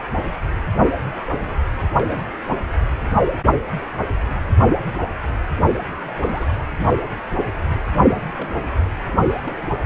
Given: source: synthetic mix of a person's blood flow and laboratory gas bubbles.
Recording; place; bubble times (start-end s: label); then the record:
Doppler ultrasound of blood flow; precordium
1.95-2.32 s: bubbles
2.49-2.56 s: bubbles
2.69-2.76 s: bubbles
5.79-6.49 s: bubbles
7.96-8.03 s: bubbles
8.09-8.18 s: bubbles
8.35-8.71 s: bubbles
9.07-9.14 s: bubbles
9.19-9.75 s: bubbles
From the record:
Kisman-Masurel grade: 221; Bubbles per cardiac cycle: several, 3 to 8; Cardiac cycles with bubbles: 10 to 50%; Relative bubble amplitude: barely perceptible (0.100 to 0.250); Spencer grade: 2 (many but less than half of the cardiac periods contain bubble signals, singularly or in groups); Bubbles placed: anywhere in the cardiac cycle